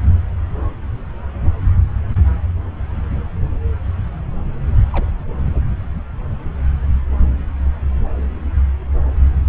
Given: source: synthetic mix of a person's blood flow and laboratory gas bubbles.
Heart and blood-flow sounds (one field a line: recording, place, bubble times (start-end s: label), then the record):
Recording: Doppler ultrasound of blood flow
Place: subclavian vein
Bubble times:
4.90-5.06 s: bubbles
5.42-5.61 s: bubbles
From the record:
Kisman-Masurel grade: 111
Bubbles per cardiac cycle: 1 to 2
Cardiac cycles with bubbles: 1 to 10%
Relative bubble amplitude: barely perceptible (0.100 to 0.250)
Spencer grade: 1 (occasional bubble signal discernible with the cardiac motion signal, with majority of cardiac periods free of bubbles)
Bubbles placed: anywhere in the cardiac cycle